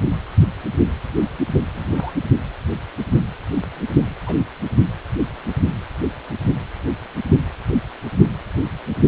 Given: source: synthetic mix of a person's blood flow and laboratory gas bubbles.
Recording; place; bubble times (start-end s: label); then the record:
Doppler ultrasound of blood flow; precordium
1.73-2.13 s: bubbles
4.26-4.37 s: bubbles
From the record:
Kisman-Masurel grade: 121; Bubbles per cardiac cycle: 1 to 2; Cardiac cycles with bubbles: 10 to 50%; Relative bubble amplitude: barely perceptible (0.100 to 0.250); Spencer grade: 2 (many but less than half of the cardiac periods contain bubble signals, singularly or in groups); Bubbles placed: only in the low amplitude regions of the cardiac cycle